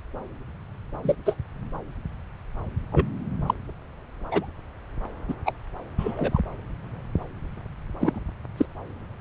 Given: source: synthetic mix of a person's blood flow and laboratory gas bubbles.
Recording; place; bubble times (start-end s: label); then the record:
Doppler ultrasound of blood flow; subclavian vein
1.04-1.15 s: bubbles
1.25-1.35 s: bubbles
2.92-3.07 s: bubbles
3.46-3.54 s: bubbles
4.31-4.46 s: bubbles
5.28-5.34 s: bubbles
5.46-5.53 s: bubbles
5.98-6.41 s: bubbles
8.01-8.20 s: bubbles
8.57-8.65 s: bubbles
From the record:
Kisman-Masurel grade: 122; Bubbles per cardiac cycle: 1 to 2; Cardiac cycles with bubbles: 10 to 50%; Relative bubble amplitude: moderate (0.250 to 0.450); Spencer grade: 2 (many but less than half of the cardiac periods contain bubble signals, singularly or in groups); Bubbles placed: anywhere in the cardiac cycle